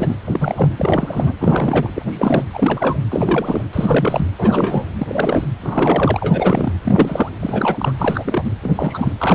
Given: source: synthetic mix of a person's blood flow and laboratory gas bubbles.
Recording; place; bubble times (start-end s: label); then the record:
Doppler ultrasound of blood flow; precordium
0.00-0.19 s: bubbles
0.26-0.72 s: bubbles
0.76-1.33 s: bubbles
1.40-1.89 s: bubbles
1.95-2.03 s: bubbles
2.12-2.44 s: bubbles
2.54-2.98 s: bubbles
3.11-3.63 s: bubbles
3.72-4.28 s: bubbles
4.38-4.86 s: bubbles
4.99-5.45 s: bubbles
5.61-6.73 s: bubbles
6.83-7.29 s: bubbles
7.40-7.93 s: bubbles
7.98-8.54 s: bubbles
8.62-8.71 s: bubbles
8.75-9.12 s: bubbles
9.18-9.35 s: bubbles
From the record:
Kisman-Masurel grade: 342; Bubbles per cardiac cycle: rolling drumbeat, 9 or more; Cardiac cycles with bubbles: 100%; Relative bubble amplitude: moderate (0.250 to 0.450); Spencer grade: 3 (all of the cardiac periods contain showers or single bubble signals, but not dominating or overriding the cardiac motion signals); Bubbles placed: anywhere in the cardiac cycle